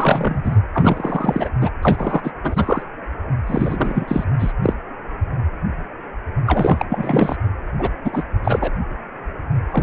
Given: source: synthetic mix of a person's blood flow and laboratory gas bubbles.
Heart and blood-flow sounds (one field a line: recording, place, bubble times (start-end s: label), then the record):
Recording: Doppler ultrasound of blood flow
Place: precordium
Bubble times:
0.00-0.60 s: bubbles
0.73-1.50 s: bubbles
1.60-1.70 s: bubbles
1.82-2.31 s: bubbles
2.44-2.83 s: bubbles
3.47-4.24 s: bubbles
4.39-4.52 s: bubbles
4.63-4.74 s: bubbles
6.46-6.86 s: bubbles
6.89-7.36 s: bubbles
7.78-7.89 s: bubbles
8.04-8.24 s: bubbles
8.44-8.71 s: bubbles
9.71-9.83 s: bubbles
From the record:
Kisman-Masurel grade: 333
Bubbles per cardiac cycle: rolling drumbeat, 9 or more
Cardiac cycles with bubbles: 50 to 99%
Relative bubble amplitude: loud (0.450 to 0.775)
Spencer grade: 3 (all of the cardiac periods contain showers or single bubble signals, but not dominating or overriding the cardiac motion signals)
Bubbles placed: anywhere in the cardiac cycle